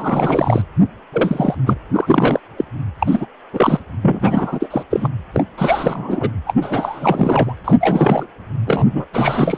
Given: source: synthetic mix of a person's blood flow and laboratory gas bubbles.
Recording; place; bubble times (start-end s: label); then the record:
Doppler ultrasound of blood flow; precordium
0.00-0.62 s: bubbles
1.12-1.55 s: bubbles
1.66-1.78 s: bubbles
1.93-2.40 s: bubbles
2.56-2.65 s: bubbles
3.00-3.25 s: bubbles
3.53-3.79 s: bubbles
4.01-4.83 s: bubbles
4.90-5.08 s: bubbles
5.32-5.43 s: bubbles
5.57-6.29 s: bubbles
6.46-6.53 s: bubbles
6.61-7.53 s: bubbles
7.64-7.77 s: bubbles
7.80-8.27 s: bubbles
8.66-9.06 s: bubbles
9.12-9.58 s: bubbles
From the record:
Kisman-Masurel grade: 343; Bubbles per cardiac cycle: rolling drumbeat, 9 or more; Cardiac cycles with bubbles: 100%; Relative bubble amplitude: loud (0.450 to 0.775); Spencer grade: 3 (all of the cardiac periods contain showers or single bubble signals, but not dominating or overriding the cardiac motion signals); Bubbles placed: anywhere in the cardiac cycle